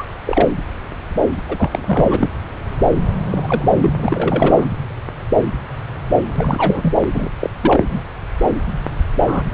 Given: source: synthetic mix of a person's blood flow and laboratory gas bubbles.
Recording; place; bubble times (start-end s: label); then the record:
Doppler ultrasound of blood flow; subclavian vein
0.00-0.04 s: bubbles
0.26-0.49 s: bubbles
1.48-2.30 s: bubbles
3.30-3.68 s: bubbles
3.81-3.93 s: bubbles
3.96-4.66 s: bubbles
6.27-6.94 s: bubbles
7.14-7.29 s: bubbles
7.41-7.50 s: bubbles
7.62-7.84 s: bubbles
7.89-8.01 s: bubbles
9.27-9.43 s: bubbles
9.51-9.54 s: bubbles
From the record:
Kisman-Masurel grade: 222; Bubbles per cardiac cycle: several, 3 to 8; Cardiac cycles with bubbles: 10 to 50%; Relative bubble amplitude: moderate (0.250 to 0.450); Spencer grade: 2 (many but less than half of the cardiac periods contain bubble signals, singularly or in groups); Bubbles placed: anywhere in the cardiac cycle